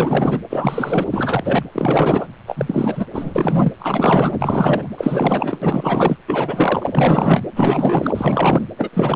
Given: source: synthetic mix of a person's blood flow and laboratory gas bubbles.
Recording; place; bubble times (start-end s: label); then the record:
Doppler ultrasound of blood flow; precordium
0.00-0.41 s: bubbles
0.50-1.07 s: bubbles
1.10-1.63 s: bubbles
1.72-2.27 s: bubbles
2.46-3.06 s: bubbles
3.14-3.72 s: bubbles
3.79-4.38 s: bubbles
4.41-4.89 s: bubbles
4.97-5.58 s: bubbles
5.62-6.17 s: bubbles
6.27-7.43 s: bubbles
7.55-8.65 s: bubbles
8.78-8.89 s: bubbles
8.93-9.16 s: bubbles
From the record:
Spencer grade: 4 (maximum detectable bubble signal sounding continuously throughout systole and diastole of every cardiac period, and overriding the amplitude of the normal cardiac signals); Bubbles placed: anywhere in the cardiac cycle